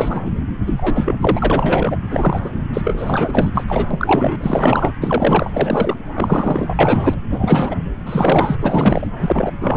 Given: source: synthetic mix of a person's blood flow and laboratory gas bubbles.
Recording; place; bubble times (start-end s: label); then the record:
Doppler ultrasound of blood flow; subclavian vein
0.00-0.21 s: bubbles
0.25-0.31 s: bubbles
0.67-1.96 s: bubbles
2.09-2.50 s: bubbles
2.73-2.81 s: bubbles
2.83-3.50 s: bubbles
3.54-3.64 s: bubbles
3.67-3.87 s: bubbles
3.91-4.92 s: bubbles
5.01-5.95 s: bubbles
6.13-6.74 s: bubbles
6.79-7.16 s: bubbles
7.30-7.75 s: bubbles
8.05-8.56 s: bubbles
8.59-9.07 s: bubbles
9.20-9.53 s: bubbles
9.61-9.77 s: bubbles
From the record:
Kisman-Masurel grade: 343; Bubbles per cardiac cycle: rolling drumbeat, 9 or more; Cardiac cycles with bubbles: 100%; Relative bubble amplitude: loud (0.450 to 0.775); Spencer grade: 3 (all of the cardiac periods contain showers or single bubble signals, but not dominating or overriding the cardiac motion signals); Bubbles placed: anywhere in the cardiac cycle